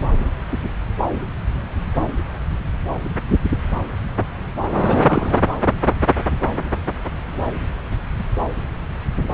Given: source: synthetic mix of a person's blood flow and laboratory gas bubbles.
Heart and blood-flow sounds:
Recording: Doppler ultrasound of blood flow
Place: subclavian vein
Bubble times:
4.78-5.40 s: bubbles
From the record:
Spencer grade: 1 (occasional bubble signal discernible with the cardiac motion signal, with majority of cardiac periods free of bubbles)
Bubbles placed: anywhere in the cardiac cycle

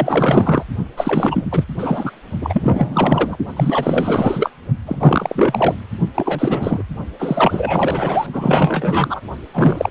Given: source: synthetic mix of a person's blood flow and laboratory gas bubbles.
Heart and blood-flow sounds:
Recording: Doppler ultrasound of blood flow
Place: precordium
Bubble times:
0.00-0.64 s: bubbles
0.96-1.64 s: bubbles
1.78-2.12 s: bubbles
2.41-3.37 s: bubbles
3.56-4.50 s: bubbles
4.85-5.75 s: bubbles
6.14-6.83 s: bubbles
7.19-8.27 s: bubbles
8.32-9.21 s: bubbles
9.53-9.91 s: bubbles
From the record:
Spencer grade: 4 (maximum detectable bubble signal sounding continuously throughout systole and diastole of every cardiac period, and overriding the amplitude of the normal cardiac signals)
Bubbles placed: only in the low amplitude regions of the cardiac cycle

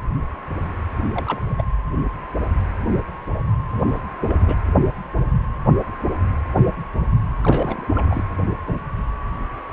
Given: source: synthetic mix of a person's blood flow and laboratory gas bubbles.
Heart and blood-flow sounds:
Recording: Doppler ultrasound of blood flow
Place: precordium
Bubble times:
1.14-1.41 s: bubbles
1.49-1.64 s: bubbles
3.68-4.02 s: bubbles
4.21-4.54 s: bubbles
7.43-7.85 s: bubbles
7.95-8.06 s: bubbles
8.09-8.24 s: bubbles
From the record:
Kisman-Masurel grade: 221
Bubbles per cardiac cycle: several, 3 to 8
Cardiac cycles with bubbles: 10 to 50%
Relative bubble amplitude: barely perceptible (0.100 to 0.250)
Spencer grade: 2 (many but less than half of the cardiac periods contain bubble signals, singularly or in groups)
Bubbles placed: anywhere in the cardiac cycle

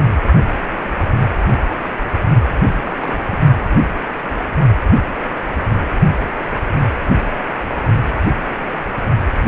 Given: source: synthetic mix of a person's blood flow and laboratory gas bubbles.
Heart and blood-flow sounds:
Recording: Doppler ultrasound of blood flow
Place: precordium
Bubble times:
2.54-3.24 s: bubbles
3.31-3.39 s: bubbles
From the record:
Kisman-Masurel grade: 221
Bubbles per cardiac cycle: several, 3 to 8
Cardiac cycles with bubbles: 10 to 50%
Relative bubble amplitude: barely perceptible (0.100 to 0.250)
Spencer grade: 2 (many but less than half of the cardiac periods contain bubble signals, singularly or in groups)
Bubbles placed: only in the low amplitude regions of the cardiac cycle

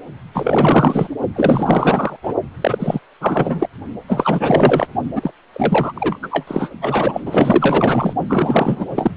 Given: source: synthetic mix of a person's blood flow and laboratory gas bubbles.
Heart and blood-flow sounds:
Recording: Doppler ultrasound of blood flow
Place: precordium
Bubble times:
0.34-1.08 s: bubbles
1.34-2.17 s: bubbles
2.23-2.34 s: bubbles
2.61-2.99 s: bubbles
3.20-3.68 s: bubbles
4.07-4.87 s: bubbles
5.15-5.31 s: bubbles
5.52-5.92 s: bubbles
5.95-6.18 s: bubbles
6.22-6.28 s: bubbles
6.30-6.70 s: bubbles
6.81-7.21 s: bubbles
7.25-8.15 s: bubbles
8.27-8.86 s: bubbles
8.95-9.11 s: bubbles
From the record:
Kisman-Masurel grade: 444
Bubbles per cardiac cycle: continuous sound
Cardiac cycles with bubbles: 100%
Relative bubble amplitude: maximal (0.775 to 0.999)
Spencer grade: 4 (maximum detectable bubble signal sounding continuously throughout systole and diastole of every cardiac period, and overriding the amplitude of the normal cardiac signals)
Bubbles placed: only in the low amplitude regions of the cardiac cycle

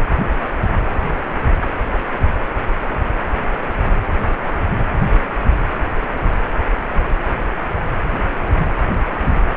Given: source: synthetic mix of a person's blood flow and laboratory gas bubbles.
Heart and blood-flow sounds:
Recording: Doppler ultrasound of blood flow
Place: precordium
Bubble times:
no bubbles
From the record:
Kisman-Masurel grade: 000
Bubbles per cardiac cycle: 0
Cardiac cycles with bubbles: 0%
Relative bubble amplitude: no bubbles discernible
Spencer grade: 0 (complete lack of bubble signals)

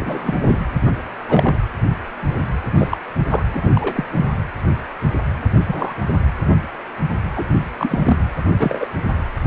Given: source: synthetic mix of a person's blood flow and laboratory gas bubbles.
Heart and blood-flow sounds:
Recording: Doppler ultrasound of blood flow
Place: precordium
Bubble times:
0.00-0.35 s: bubbles
0.43-0.58 s: bubbles
0.85-0.92 s: bubbles
1.27-1.57 s: bubbles
2.77-2.88 s: bubbles
2.90-2.98 s: bubbles
3.19-3.23 s: bubbles
3.29-3.42 s: bubbles
3.48-3.69 s: bubbles
3.75-4.05 s: bubbles
4.17-4.25 s: bubbles
5.67-5.95 s: bubbles
7.36-7.46 s: bubbles
7.79-8.17 s: bubbles
8.60-8.87 s: bubbles
From the record:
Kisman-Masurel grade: 233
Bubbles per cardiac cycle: several, 3 to 8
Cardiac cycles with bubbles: 50 to 99%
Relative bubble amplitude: loud (0.450 to 0.775)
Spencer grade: 3 (all of the cardiac periods contain showers or single bubble signals, but not dominating or overriding the cardiac motion signals)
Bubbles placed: anywhere in the cardiac cycle

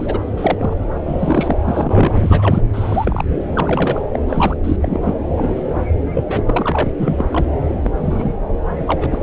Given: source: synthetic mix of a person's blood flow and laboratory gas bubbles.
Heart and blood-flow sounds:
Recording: Doppler ultrasound of blood flow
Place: subclavian vein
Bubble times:
0.00-0.19 s: bubbles
0.37-0.74 s: bubbles
1.07-1.56 s: bubbles
1.65-2.61 s: bubbles
2.73-3.25 s: bubbles
3.54-4.02 s: bubbles
4.15-4.19 s: bubbles
4.27-4.56 s: bubbles
4.63-4.76 s: bubbles
4.81-5.13 s: bubbles
5.28-5.62 s: bubbles
6.13-6.23 s: bubbles
6.27-6.43 s: bubbles
6.47-6.92 s: bubbles
6.98-7.25 s: bubbles
7.30-7.45 s: bubbles
7.82-7.91 s: bubbles
7.96-8.36 s: bubbles
8.75-9.06 s: bubbles
9.11-9.23 s: bubbles
From the record:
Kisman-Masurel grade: 232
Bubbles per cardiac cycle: several, 3 to 8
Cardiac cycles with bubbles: 50 to 99%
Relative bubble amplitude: moderate (0.250 to 0.450)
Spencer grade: 3 (all of the cardiac periods contain showers or single bubble signals, but not dominating or overriding the cardiac motion signals)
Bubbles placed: anywhere in the cardiac cycle

